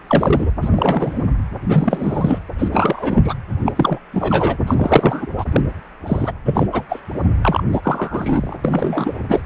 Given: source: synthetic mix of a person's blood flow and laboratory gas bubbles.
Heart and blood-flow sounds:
Doppler ultrasound of blood flow; precordium
0.07-0.51 s: bubbles
0.61-1.26 s: bubbles
1.61-2.38 s: bubbles
2.58-2.68 s: bubbles
2.72-3.34 s: bubbles
3.65-3.72 s: bubbles
3.75-3.98 s: bubbles
4.14-4.57 s: bubbles
4.67-5.26 s: bubbles
5.38-5.45 s: bubbles
5.52-5.61 s: bubbles
6.06-6.32 s: bubbles
6.45-6.67 s: bubbles
6.72-6.83 s: bubbles
6.89-7.00 s: bubbles
7.42-7.62 s: bubbles
7.72-8.56 s: bubbles
8.64-9.19 s: bubbles
9.29-9.42 s: bubbles
From the record:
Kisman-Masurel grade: 343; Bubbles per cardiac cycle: rolling drumbeat, 9 or more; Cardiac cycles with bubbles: 100%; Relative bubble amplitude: loud (0.450 to 0.775); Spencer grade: 3 (all of the cardiac periods contain showers or single bubble signals, but not dominating or overriding the cardiac motion signals); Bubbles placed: anywhere in the cardiac cycle

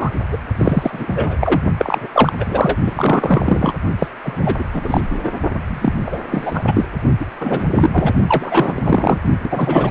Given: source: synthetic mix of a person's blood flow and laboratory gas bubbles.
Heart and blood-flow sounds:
Doppler ultrasound of blood flow; precordium
0.00-0.10 s: bubbles
0.32-0.38 s: bubbles
0.58-1.05 s: bubbles
1.08-1.38 s: bubbles
1.41-1.61 s: bubbles
1.77-2.08 s: bubbles
2.12-2.33 s: bubbles
2.40-2.79 s: bubbles
2.85-3.74 s: bubbles
3.99-4.08 s: bubbles
4.23-4.65 s: bubbles
4.73-5.01 s: bubbles
5.09-5.40 s: bubbles
5.67-6.20 s: bubbles
6.30-6.63 s: bubbles
6.67-6.84 s: bubbles
7.20-7.26 s: bubbles
7.40-7.67 s: bubbles
7.74-8.13 s: bubbles
8.27-9.18 s: bubbles
9.43-9.90 s: bubbles
From the record:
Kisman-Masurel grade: 343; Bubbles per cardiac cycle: rolling drumbeat, 9 or more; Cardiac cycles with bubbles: 100%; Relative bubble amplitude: loud (0.450 to 0.775); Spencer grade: 3 (all of the cardiac periods contain showers or single bubble signals, but not dominating or overriding the cardiac motion signals); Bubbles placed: only in the low amplitude regions of the cardiac cycle

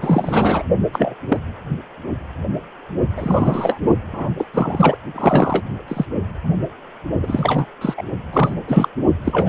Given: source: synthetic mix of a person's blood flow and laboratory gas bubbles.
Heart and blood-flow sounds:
Doppler ultrasound of blood flow; precordium
0.01-0.63 s: bubbles
0.93-1.15 s: bubbles
1.28-1.38 s: bubbles
3.15-3.81 s: bubbles
4.13-4.30 s: bubbles
4.38-4.47 s: bubbles
4.54-4.97 s: bubbles
5.15-5.63 s: bubbles
5.88-6.06 s: bubbles
7.23-7.66 s: bubbles
7.81-7.94 s: bubbles
7.97-8.03 s: bubbles
8.32-8.55 s: bubbles
8.67-8.88 s: bubbles
9.24-9.49 s: bubbles
From the record:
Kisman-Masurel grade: 233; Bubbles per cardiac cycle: several, 3 to 8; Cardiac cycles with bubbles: 50 to 99%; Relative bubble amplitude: loud (0.450 to 0.775); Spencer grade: 3 (all of the cardiac periods contain showers or single bubble signals, but not dominating or overriding the cardiac motion signals); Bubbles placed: only in the low amplitude regions of the cardiac cycle

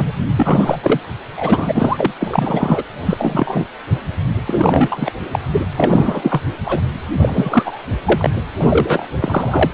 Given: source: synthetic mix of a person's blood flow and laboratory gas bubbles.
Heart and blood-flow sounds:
Doppler ultrasound of blood flow; precordium
0.00-0.12 s: bubbles
0.35-0.78 s: bubbles
0.83-1.00 s: bubbles
1.36-2.12 s: bubbles
2.20-2.83 s: bubbles
3.05-3.65 s: bubbles
4.47-5.12 s: bubbles
5.32-5.39 s: bubbles
5.51-5.61 s: bubbles
5.77-6.42 s: bubbles
6.65-6.81 s: bubbles
7.23-7.82 s: bubbles
8.05-8.29 s: bubbles
8.59-9.06 s: bubbles
9.19-9.71 s: bubbles
From the record:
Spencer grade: 3 (all of the cardiac periods contain showers or single bubble signals, but not dominating or overriding the cardiac motion signals); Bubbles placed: anywhere in the cardiac cycle

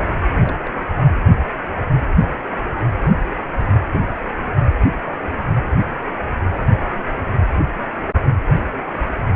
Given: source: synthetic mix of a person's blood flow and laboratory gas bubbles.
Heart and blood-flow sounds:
Doppler ultrasound of blood flow; precordium
0.42-0.71 s: bubbles
0.98-1.12 s: bubbles
3.00-3.10 s: bubbles
3.92-4.06 s: bubbles
From the record:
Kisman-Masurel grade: 121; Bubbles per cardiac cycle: 1 to 2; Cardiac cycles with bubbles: 10 to 50%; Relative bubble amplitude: barely perceptible (0.100 to 0.250); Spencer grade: 2 (many but less than half of the cardiac periods contain bubble signals, singularly or in groups); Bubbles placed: anywhere in the cardiac cycle

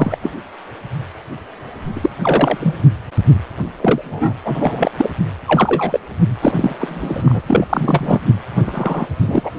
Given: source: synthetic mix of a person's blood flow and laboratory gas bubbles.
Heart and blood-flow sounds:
Doppler ultrasound of blood flow; precordium
0.00-0.18 s: bubbles
0.23-0.31 s: bubbles
1.96-2.10 s: bubbles
2.21-2.75 s: bubbles
3.77-4.34 s: bubbles
4.44-4.91 s: bubbles
4.98-5.10 s: bubbles
5.48-6.00 s: bubbles
6.41-6.76 s: bubbles
6.79-7.40 s: bubbles
7.47-7.66 s: bubbles
7.69-8.20 s: bubbles
8.66-9.07 s: bubbles
9.20-9.51 s: bubbles
From the record:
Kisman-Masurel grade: 233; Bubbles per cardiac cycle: several, 3 to 8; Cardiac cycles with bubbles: 50 to 99%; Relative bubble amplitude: loud (0.450 to 0.775); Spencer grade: 3 (all of the cardiac periods contain showers or single bubble signals, but not dominating or overriding the cardiac motion signals); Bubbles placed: anywhere in the cardiac cycle

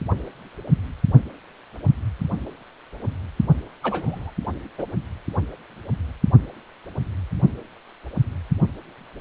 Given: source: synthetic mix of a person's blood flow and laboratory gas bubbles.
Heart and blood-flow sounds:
Doppler ultrasound of blood flow; precordium
3.83-4.30 s: bubbles
4.78-4.86 s: bubbles
From the record:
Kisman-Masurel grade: 222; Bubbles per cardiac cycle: several, 3 to 8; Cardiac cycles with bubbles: 10 to 50%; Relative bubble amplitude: moderate (0.250 to 0.450); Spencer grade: 2 (many but less than half of the cardiac periods contain bubble signals, singularly or in groups); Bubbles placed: only in the low amplitude regions of the cardiac cycle

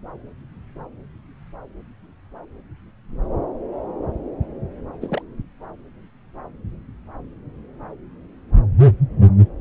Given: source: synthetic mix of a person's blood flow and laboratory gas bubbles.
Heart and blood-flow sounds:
Doppler ultrasound of blood flow; subclavian vein
5.01-5.22 s: bubbles
From the record:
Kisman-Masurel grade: 111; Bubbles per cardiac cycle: 1 to 2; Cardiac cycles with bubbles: 1 to 10%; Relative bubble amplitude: barely perceptible (0.100 to 0.250); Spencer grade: 1 (occasional bubble signal discernible with the cardiac motion signal, with majority of cardiac periods free of bubbles); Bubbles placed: anywhere in the cardiac cycle

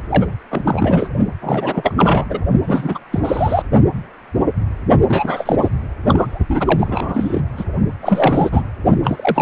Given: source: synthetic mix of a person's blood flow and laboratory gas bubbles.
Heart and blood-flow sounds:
Doppler ultrasound of blood flow; precordium
0.09-0.27 s: bubbles
0.51-1.09 s: bubbles
1.42-1.94 s: bubbles
1.96-2.27 s: bubbles
2.29-2.39 s: bubbles
2.62-3.00 s: bubbles
3.11-3.20 s: bubbles
3.24-3.62 s: bubbles
5.08-5.56 s: bubbles
5.60-5.68 s: bubbles
6.07-6.38 s: bubbles
6.49-7.41 s: bubbles
7.56-7.64 s: bubbles
8.01-8.49 s: bubbles
8.52-8.64 s: bubbles
9.03-9.42 s: bubbles
From the record:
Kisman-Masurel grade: 333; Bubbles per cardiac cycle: rolling drumbeat, 9 or more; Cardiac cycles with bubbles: 50 to 99%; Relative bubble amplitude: loud (0.450 to 0.775); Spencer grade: 3 (all of the cardiac periods contain showers or single bubble signals, but not dominating or overriding the cardiac motion signals); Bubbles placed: only in the low amplitude regions of the cardiac cycle

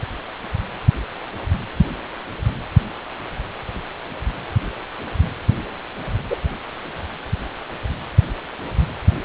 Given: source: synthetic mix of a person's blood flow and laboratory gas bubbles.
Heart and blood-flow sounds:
Doppler ultrasound of blood flow; precordium
6.29-6.36 s: bubbles
From the record:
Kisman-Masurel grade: 113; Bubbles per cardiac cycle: 1 to 2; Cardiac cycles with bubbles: 1 to 10%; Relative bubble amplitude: loud (0.450 to 0.775); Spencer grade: 1 (occasional bubble signal discernible with the cardiac motion signal, with majority of cardiac periods free of bubbles); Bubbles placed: anywhere in the cardiac cycle

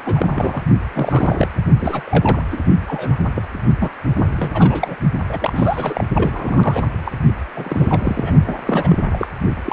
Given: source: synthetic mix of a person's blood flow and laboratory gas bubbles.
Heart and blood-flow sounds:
Doppler ultrasound of blood flow; precordium
0.05-0.62 s: bubbles
0.94-1.50 s: bubbles
1.81-2.03 s: bubbles
2.05-2.42 s: bubbles
2.50-2.58 s: bubbles
2.88-3.17 s: bubbles
3.36-3.42 s: bubbles
3.80-3.91 s: bubbles
4.16-4.27 s: bubbles
4.38-4.96 s: bubbles
5.29-6.04 s: bubbles
6.15-6.84 s: bubbles
7.05-7.12 s: bubbles
7.56-8.33 s: bubbles
8.46-8.58 s: bubbles
8.65-9.04 s: bubbles
9.11-9.27 s: bubbles
9.66-9.73 s: bubbles
From the record:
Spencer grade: 3 (all of the cardiac periods contain showers or single bubble signals, but not dominating or overriding the cardiac motion signals); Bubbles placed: only in the low amplitude regions of the cardiac cycle

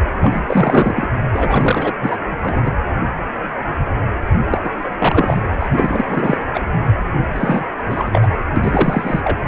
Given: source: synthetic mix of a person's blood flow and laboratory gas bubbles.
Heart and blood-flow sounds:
Doppler ultrasound of blood flow; precordium
0.21-0.42 s: bubbles
0.46-1.08 s: bubbles
1.34-1.92 s: bubbles
2.00-2.17 s: bubbles
2.40-2.71 s: bubbles
4.50-4.61 s: bubbles
4.64-4.70 s: bubbles
4.99-5.41 s: bubbles
5.60-5.69 s: bubbles
5.72-6.04 s: bubbles
6.09-6.37 s: bubbles
6.54-6.61 s: bubbles
7.35-7.64 s: bubbles
7.78-7.83 s: bubbles
7.85-8.28 s: bubbles
8.56-9.38 s: bubbles
From the record:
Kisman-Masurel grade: 333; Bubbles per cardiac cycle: rolling drumbeat, 9 or more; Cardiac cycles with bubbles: 50 to 99%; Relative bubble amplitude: loud (0.450 to 0.775); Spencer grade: 3 (all of the cardiac periods contain showers or single bubble signals, but not dominating or overriding the cardiac motion signals); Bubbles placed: anywhere in the cardiac cycle

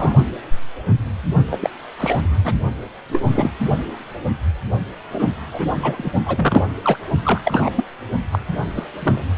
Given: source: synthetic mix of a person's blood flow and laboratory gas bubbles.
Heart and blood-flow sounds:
Doppler ultrasound of blood flow; precordium
0.00-0.14 s: bubbles
1.50-1.70 s: bubbles
1.98-2.21 s: bubbles
2.45-2.54 s: bubbles
3.12-3.50 s: bubbles
5.12-5.28 s: bubbles
5.52-5.67 s: bubbles
5.82-6.11 s: bubbles
6.25-6.66 s: bubbles
6.83-6.97 s: bubbles
7.23-7.42 s: bubbles
7.45-7.70 s: bubbles
7.75-7.84 s: bubbles
8.32-8.38 s: bubbles
8.77-8.86 s: bubbles
9.03-9.23 s: bubbles
From the record:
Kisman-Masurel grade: 232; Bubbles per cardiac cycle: several, 3 to 8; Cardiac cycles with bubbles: 50 to 99%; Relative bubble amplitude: moderate (0.250 to 0.450); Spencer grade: 3 (all of the cardiac periods contain showers or single bubble signals, but not dominating or overriding the cardiac motion signals); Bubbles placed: only in the low amplitude regions of the cardiac cycle

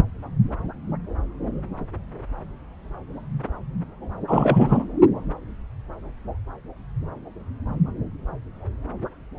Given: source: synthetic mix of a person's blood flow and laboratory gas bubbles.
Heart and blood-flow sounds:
Doppler ultrasound of blood flow; subclavian vein
4.27-4.84 s: bubbles
From the record:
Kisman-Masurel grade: 213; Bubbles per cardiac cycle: several, 3 to 8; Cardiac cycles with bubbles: 1 to 10%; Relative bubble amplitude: loud (0.450 to 0.775); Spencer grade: 1 (occasional bubble signal discernible with the cardiac motion signal, with majority of cardiac periods free of bubbles); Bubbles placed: anywhere in the cardiac cycle

